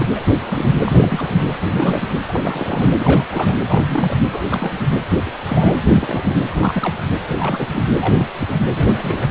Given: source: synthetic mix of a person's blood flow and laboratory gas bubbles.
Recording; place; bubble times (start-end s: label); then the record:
Doppler ultrasound of blood flow; precordium
0.00-0.32 s: bubbles
0.42-0.81 s: bubbles
0.85-1.38 s: bubbles
1.71-2.09 s: bubbles
2.27-2.90 s: bubbles
3.00-3.25 s: bubbles
3.32-3.55 s: bubbles
3.69-4.17 s: bubbles
4.32-4.42 s: bubbles
4.48-4.94 s: bubbles
5.25-5.31 s: bubbles
5.45-5.73 s: bubbles
5.94-6.37 s: bubbles
6.49-6.94 s: bubbles
7.29-7.34 s: bubbles
7.37-7.67 s: bubbles
7.72-7.82 s: bubbles
8.01-8.26 s: bubbles
8.38-8.56 s: bubbles
8.69-9.28 s: bubbles
From the record:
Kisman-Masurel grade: 242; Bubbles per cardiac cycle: several, 3 to 8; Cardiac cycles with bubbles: 100%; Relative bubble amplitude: moderate (0.250 to 0.450); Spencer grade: 3 (all of the cardiac periods contain showers or single bubble signals, but not dominating or overriding the cardiac motion signals); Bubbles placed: anywhere in the cardiac cycle